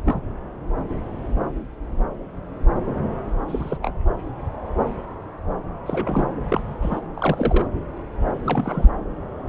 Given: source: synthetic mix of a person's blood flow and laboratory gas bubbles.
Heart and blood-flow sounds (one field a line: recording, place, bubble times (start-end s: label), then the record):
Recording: Doppler ultrasound of blood flow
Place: subclavian vein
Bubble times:
0.04-0.21 s: bubbles
3.48-3.77 s: bubbles
3.81-3.94 s: bubbles
5.86-6.29 s: bubbles
6.49-6.61 s: bubbles
6.82-7.00 s: bubbles
7.15-7.66 s: bubbles
8.43-8.88 s: bubbles
From the record:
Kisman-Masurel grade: 222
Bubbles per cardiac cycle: several, 3 to 8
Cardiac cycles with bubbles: 10 to 50%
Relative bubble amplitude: moderate (0.250 to 0.450)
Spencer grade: 2 (many but less than half of the cardiac periods contain bubble signals, singularly or in groups)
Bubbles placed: anywhere in the cardiac cycle